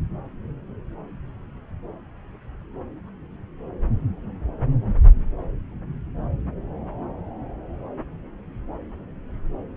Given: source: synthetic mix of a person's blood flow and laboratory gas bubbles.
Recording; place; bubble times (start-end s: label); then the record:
Doppler ultrasound of blood flow; subclavian vein
no bubbles
From the record:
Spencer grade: 0 (complete lack of bubble signals)